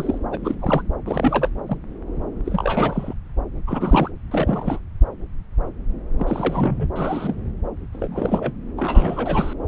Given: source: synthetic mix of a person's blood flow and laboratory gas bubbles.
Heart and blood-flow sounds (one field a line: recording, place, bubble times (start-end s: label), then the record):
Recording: Doppler ultrasound of blood flow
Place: subclavian vein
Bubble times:
0.00-0.18 s: bubbles
0.31-0.39 s: bubbles
0.41-0.82 s: bubbles
1.05-1.49 s: bubbles
1.67-1.77 s: bubbles
2.45-3.14 s: bubbles
3.67-4.11 s: bubbles
4.31-4.81 s: bubbles
6.19-6.89 s: bubbles
6.96-7.35 s: bubbles
7.92-8.52 s: bubbles
8.77-9.54 s: bubbles
From the record:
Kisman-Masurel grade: 332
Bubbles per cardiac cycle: rolling drumbeat, 9 or more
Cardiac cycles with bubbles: 50 to 99%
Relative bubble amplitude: moderate (0.250 to 0.450)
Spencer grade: 3 (all of the cardiac periods contain showers or single bubble signals, but not dominating or overriding the cardiac motion signals)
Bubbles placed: anywhere in the cardiac cycle